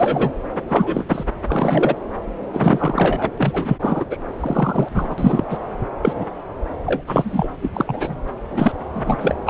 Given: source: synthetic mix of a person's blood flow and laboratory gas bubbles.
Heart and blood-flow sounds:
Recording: Doppler ultrasound of blood flow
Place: subclavian vein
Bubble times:
0.00-0.32 s: bubbles
0.68-1.04 s: bubbles
1.08-1.24 s: bubbles
1.48-1.96 s: bubbles
2.52-3.31 s: bubbles
3.38-3.77 s: bubbles
3.81-4.04 s: bubbles
4.11-4.17 s: bubbles
4.40-4.89 s: bubbles
4.94-5.45 s: bubbles
5.50-5.58 s: bubbles
6.03-6.25 s: bubbles
6.86-7.03 s: bubbles
7.07-7.50 s: bubbles
7.62-7.70 s: bubbles
7.73-8.16 s: bubbles
8.50-8.72 s: bubbles
8.94-9.35 s: bubbles
9.46-9.50 s: bubbles
From the record:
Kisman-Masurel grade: 242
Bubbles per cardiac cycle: several, 3 to 8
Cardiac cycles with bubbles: 100%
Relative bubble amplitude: moderate (0.250 to 0.450)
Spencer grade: 3 (all of the cardiac periods contain showers or single bubble signals, but not dominating or overriding the cardiac motion signals)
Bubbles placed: anywhere in the cardiac cycle

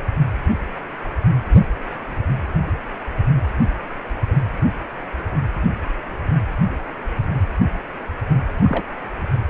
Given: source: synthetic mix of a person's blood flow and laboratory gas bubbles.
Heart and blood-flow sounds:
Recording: Doppler ultrasound of blood flow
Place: precordium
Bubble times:
8.60-8.88 s: bubbles
From the record:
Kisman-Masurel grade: 212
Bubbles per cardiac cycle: several, 3 to 8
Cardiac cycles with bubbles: 1 to 10%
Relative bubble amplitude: moderate (0.250 to 0.450)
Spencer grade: 1 (occasional bubble signal discernible with the cardiac motion signal, with majority of cardiac periods free of bubbles)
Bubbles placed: anywhere in the cardiac cycle

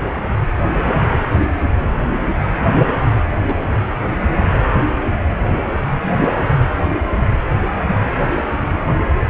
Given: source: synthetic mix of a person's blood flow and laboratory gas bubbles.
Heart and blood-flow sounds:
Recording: Doppler ultrasound of blood flow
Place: precordium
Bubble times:
3.12-3.20 s: bubbles
3.38-3.56 s: bubbles
From the record:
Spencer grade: 1 (occasional bubble signal discernible with the cardiac motion signal, with majority of cardiac periods free of bubbles)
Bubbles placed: anywhere in the cardiac cycle

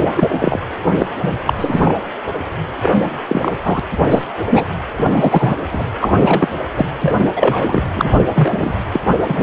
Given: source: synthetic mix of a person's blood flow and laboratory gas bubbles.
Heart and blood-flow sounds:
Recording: Doppler ultrasound of blood flow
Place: precordium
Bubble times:
0.14-0.60 s: bubbles
0.98-1.06 s: bubbles
1.22-1.42 s: bubbles
1.46-1.54 s: bubbles
1.58-2.07 s: bubbles
2.78-2.95 s: bubbles
3.27-3.52 s: bubbles
3.63-3.80 s: bubbles
4.10-4.25 s: bubbles
4.50-4.65 s: bubbles
4.97-5.56 s: bubbles
5.72-5.86 s: bubbles
5.99-6.49 s: bubbles
6.78-6.86 s: bubbles
7.02-7.31 s: bubbles
7.36-7.82 s: bubbles
7.95-8.20 s: bubbles
8.32-8.81 s: bubbles
8.92-9.00 s: bubbles
9.25-9.43 s: bubbles
From the record:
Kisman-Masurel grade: 243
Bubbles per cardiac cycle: several, 3 to 8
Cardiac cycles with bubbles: 100%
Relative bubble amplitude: loud (0.450 to 0.775)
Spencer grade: 3 (all of the cardiac periods contain showers or single bubble signals, but not dominating or overriding the cardiac motion signals)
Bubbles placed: anywhere in the cardiac cycle

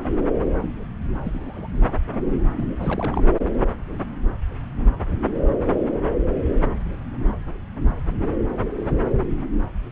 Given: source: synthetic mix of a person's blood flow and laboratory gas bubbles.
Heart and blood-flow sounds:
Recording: Doppler ultrasound of blood flow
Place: subclavian vein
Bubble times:
1.24-1.68 s: bubbles
2.56-2.65 s: bubbles
2.78-3.28 s: bubbles
From the record:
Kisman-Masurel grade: 221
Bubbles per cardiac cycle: several, 3 to 8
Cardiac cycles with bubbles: 10 to 50%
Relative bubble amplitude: barely perceptible (0.100 to 0.250)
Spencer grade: 2 (many but less than half of the cardiac periods contain bubble signals, singularly or in groups)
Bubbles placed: anywhere in the cardiac cycle

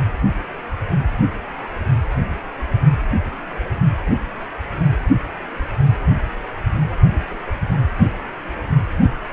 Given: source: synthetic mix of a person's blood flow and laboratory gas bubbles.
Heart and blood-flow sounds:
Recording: Doppler ultrasound of blood flow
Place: precordium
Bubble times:
7.03-7.18 s: bubbles
7.28-7.53 s: bubbles
From the record:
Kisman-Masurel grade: 111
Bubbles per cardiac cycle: 1 to 2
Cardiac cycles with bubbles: 1 to 10%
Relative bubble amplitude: barely perceptible (0.100 to 0.250)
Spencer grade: 1 (occasional bubble signal discernible with the cardiac motion signal, with majority of cardiac periods free of bubbles)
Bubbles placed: anywhere in the cardiac cycle

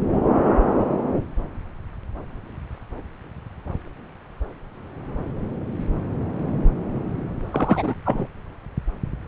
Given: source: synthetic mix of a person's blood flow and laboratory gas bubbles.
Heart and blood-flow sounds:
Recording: Doppler ultrasound of blood flow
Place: subclavian vein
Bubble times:
7.51-7.94 s: bubbles
8.04-8.27 s: bubbles
From the record:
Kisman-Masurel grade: 213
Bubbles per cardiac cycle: several, 3 to 8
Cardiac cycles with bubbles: 1 to 10%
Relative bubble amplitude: loud (0.450 to 0.775)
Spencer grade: 1 (occasional bubble signal discernible with the cardiac motion signal, with majority of cardiac periods free of bubbles)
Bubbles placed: anywhere in the cardiac cycle

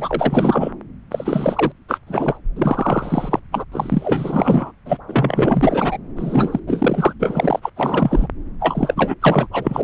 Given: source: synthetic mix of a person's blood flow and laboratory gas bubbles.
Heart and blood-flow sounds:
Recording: Doppler ultrasound of blood flow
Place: subclavian vein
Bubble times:
0.00-0.72 s: bubbles
1.11-1.72 s: bubbles
1.88-1.99 s: bubbles
2.06-2.37 s: bubbles
2.56-3.40 s: bubbles
3.51-3.65 s: bubbles
3.71-4.72 s: bubbles
4.85-4.98 s: bubbles
5.08-5.98 s: bubbles
6.16-6.60 s: bubbles
6.67-7.13 s: bubbles
7.20-7.70 s: bubbles
7.76-8.27 s: bubbles
8.59-9.14 s: bubbles
9.21-9.46 s: bubbles
9.52-9.84 s: bubbles
From the record:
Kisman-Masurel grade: 444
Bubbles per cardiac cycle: continuous sound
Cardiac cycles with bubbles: 100%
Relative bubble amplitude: maximal (0.775 to 0.999)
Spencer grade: 4 (maximum detectable bubble signal sounding continuously throughout systole and diastole of every cardiac period, and overriding the amplitude of the normal cardiac signals)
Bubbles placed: anywhere in the cardiac cycle

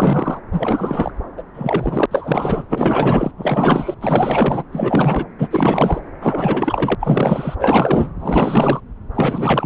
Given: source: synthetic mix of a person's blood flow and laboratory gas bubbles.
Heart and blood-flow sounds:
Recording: Doppler ultrasound of blood flow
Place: subclavian vein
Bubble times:
0.00-0.40 s: bubbles
0.52-1.11 s: bubbles
1.37-1.43 s: bubbles
1.54-2.06 s: bubbles
2.10-2.66 s: bubbles
2.69-3.31 s: bubbles
3.37-3.95 s: bubbles
4.01-4.63 s: bubbles
4.72-5.25 s: bubbles
5.38-5.48 s: bubbles
5.50-6.01 s: bubbles
6.21-6.95 s: bubbles
7.00-7.55 s: bubbles
7.59-8.08 s: bubbles
8.19-8.80 s: bubbles
9.14-9.66 s: bubbles
From the record:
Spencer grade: 4 (maximum detectable bubble signal sounding continuously throughout systole and diastole of every cardiac period, and overriding the amplitude of the normal cardiac signals)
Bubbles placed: anywhere in the cardiac cycle

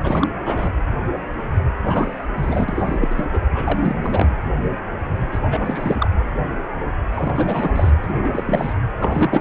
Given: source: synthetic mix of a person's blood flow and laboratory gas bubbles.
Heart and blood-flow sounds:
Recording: Doppler ultrasound of blood flow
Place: precordium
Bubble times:
0.04-0.28 s: bubbles
0.45-0.71 s: bubbles
1.83-2.26 s: bubbles
2.36-3.08 s: bubbles
3.10-3.25 s: bubbles
3.33-3.39 s: bubbles
3.54-3.96 s: bubbles
4.02-4.29 s: bubbles
5.31-5.39 s: bubbles
5.43-6.10 s: bubbles
7.12-7.91 s: bubbles
8.03-8.74 s: bubbles
9.01-9.41 s: bubbles
From the record:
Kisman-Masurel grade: 332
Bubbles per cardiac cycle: rolling drumbeat, 9 or more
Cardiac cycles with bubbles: 50 to 99%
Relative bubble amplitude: moderate (0.250 to 0.450)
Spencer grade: 3 (all of the cardiac periods contain showers or single bubble signals, but not dominating or overriding the cardiac motion signals)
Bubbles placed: anywhere in the cardiac cycle

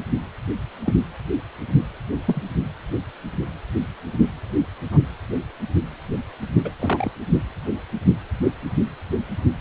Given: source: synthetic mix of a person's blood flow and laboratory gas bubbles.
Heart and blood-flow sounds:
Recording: Doppler ultrasound of blood flow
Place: precordium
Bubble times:
0.85-0.94 s: bubbles
2.27-2.42 s: bubbles
4.91-4.99 s: bubbles
6.64-6.72 s: bubbles
6.79-7.11 s: bubbles
From the record:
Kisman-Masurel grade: 122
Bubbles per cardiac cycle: 1 to 2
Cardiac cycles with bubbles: 10 to 50%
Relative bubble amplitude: moderate (0.250 to 0.450)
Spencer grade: 2 (many but less than half of the cardiac periods contain bubble signals, singularly or in groups)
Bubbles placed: anywhere in the cardiac cycle

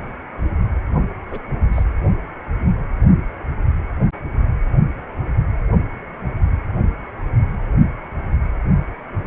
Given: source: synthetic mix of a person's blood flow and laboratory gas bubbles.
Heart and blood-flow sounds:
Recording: Doppler ultrasound of blood flow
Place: precordium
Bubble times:
1.31-1.43 s: bubbles
1.73-1.83 s: bubbles
From the record:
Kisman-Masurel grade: 111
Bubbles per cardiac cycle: 1 to 2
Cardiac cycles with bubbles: 1 to 10%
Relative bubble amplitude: barely perceptible (0.100 to 0.250)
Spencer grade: 1 (occasional bubble signal discernible with the cardiac motion signal, with majority of cardiac periods free of bubbles)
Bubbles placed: only in the low amplitude regions of the cardiac cycle

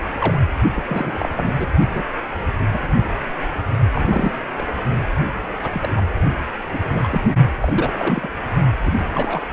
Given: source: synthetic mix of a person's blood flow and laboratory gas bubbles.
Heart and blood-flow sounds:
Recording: Doppler ultrasound of blood flow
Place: precordium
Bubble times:
0.18-0.41 s: bubbles
0.74-0.83 s: bubbles
0.88-1.29 s: bubbles
1.35-1.67 s: bubbles
1.94-2.04 s: bubbles
2.58-2.67 s: bubbles
2.73-2.79 s: bubbles
3.94-4.33 s: bubbles
4.58-4.66 s: bubbles
5.63-6.08 s: bubbles
6.72-6.79 s: bubbles
6.91-7.22 s: bubbles
7.61-8.29 s: bubbles
8.84-9.06 s: bubbles
9.14-9.46 s: bubbles
From the record:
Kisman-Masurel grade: 232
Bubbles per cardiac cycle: several, 3 to 8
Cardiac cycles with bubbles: 50 to 99%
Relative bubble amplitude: moderate (0.250 to 0.450)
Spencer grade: 3 (all of the cardiac periods contain showers or single bubble signals, but not dominating or overriding the cardiac motion signals)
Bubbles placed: only in the low amplitude regions of the cardiac cycle

